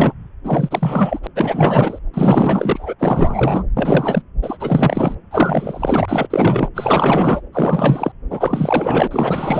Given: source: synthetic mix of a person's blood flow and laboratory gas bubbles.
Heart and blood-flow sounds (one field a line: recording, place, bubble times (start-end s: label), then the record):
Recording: Doppler ultrasound of blood flow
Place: subclavian vein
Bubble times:
0.00-0.13 s: bubbles
0.43-1.19 s: bubbles
1.22-1.27 s: bubbles
1.35-1.98 s: bubbles
2.13-2.94 s: bubbles
2.98-3.63 s: bubbles
3.76-4.22 s: bubbles
4.42-5.14 s: bubbles
5.31-6.05 s: bubbles
6.08-6.27 s: bubbles
6.30-6.68 s: bubbles
6.75-7.42 s: bubbles
7.53-8.12 s: bubbles
8.30-9.07 s: bubbles
9.11-9.60 s: bubbles
From the record:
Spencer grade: 4 (maximum detectable bubble signal sounding continuously throughout systole and diastole of every cardiac period, and overriding the amplitude of the normal cardiac signals)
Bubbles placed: anywhere in the cardiac cycle